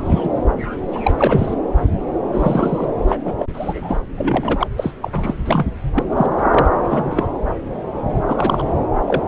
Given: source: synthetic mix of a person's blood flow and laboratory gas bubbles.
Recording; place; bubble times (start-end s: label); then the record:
Doppler ultrasound of blood flow; subclavian vein
0.00-0.30 s: bubbles
0.94-1.54 s: bubbles
2.32-2.86 s: bubbles
3.07-3.18 s: bubbles
3.25-3.33 s: bubbles
3.38-3.46 s: bubbles
3.53-4.00 s: bubbles
4.16-4.67 s: bubbles
4.77-4.94 s: bubbles
5.01-5.34 s: bubbles
5.45-5.66 s: bubbles
5.94-6.04 s: bubbles
6.17-6.26 s: bubbles
6.36-6.43 s: bubbles
6.50-6.66 s: bubbles
6.89-7.27 s: bubbles
8.26-8.73 s: bubbles
9.06-9.22 s: bubbles
From the record:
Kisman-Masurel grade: 233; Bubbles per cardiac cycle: several, 3 to 8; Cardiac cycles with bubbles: 50 to 99%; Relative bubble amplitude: loud (0.450 to 0.775); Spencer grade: 3 (all of the cardiac periods contain showers or single bubble signals, but not dominating or overriding the cardiac motion signals); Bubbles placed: anywhere in the cardiac cycle